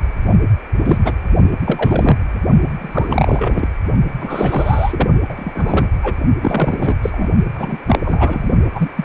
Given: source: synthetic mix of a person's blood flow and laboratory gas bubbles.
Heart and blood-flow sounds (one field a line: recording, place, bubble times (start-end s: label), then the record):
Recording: Doppler ultrasound of blood flow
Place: precordium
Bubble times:
0.30-0.35 s: bubbles
0.85-0.99 s: bubbles
1.04-1.13 s: bubbles
1.65-2.17 s: bubbles
2.79-3.68 s: bubbles
4.20-5.07 s: bubbles
5.28-5.52 s: bubbles
5.55-5.88 s: bubbles
6.03-6.16 s: bubbles
6.40-6.96 s: bubbles
7.02-7.28 s: bubbles
7.56-7.78 s: bubbles
7.87-7.99 s: bubbles
8.04-8.49 s: bubbles
8.74-8.90 s: bubbles
8.96-9.04 s: bubbles
From the record:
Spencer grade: 3 (all of the cardiac periods contain showers or single bubble signals, but not dominating or overriding the cardiac motion signals)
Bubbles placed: only in the low amplitude regions of the cardiac cycle